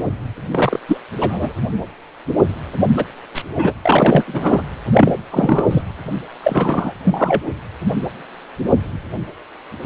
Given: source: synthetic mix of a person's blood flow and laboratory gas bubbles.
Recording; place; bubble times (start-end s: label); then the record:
Doppler ultrasound of blood flow; precordium
0.51-0.80 s: bubbles
0.88-0.97 s: bubbles
1.20-1.53 s: bubbles
2.97-3.04 s: bubbles
3.35-3.43 s: bubbles
3.55-3.73 s: bubbles
3.85-4.25 s: bubbles
4.27-4.62 s: bubbles
4.90-5.12 s: bubbles
5.30-5.65 s: bubbles
5.71-5.82 s: bubbles
6.42-6.94 s: bubbles
7.04-7.50 s: bubbles
From the record:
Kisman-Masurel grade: 233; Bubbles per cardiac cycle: several, 3 to 8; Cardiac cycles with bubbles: 50 to 99%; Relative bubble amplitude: loud (0.450 to 0.775); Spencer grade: 3 (all of the cardiac periods contain showers or single bubble signals, but not dominating or overriding the cardiac motion signals); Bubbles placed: anywhere in the cardiac cycle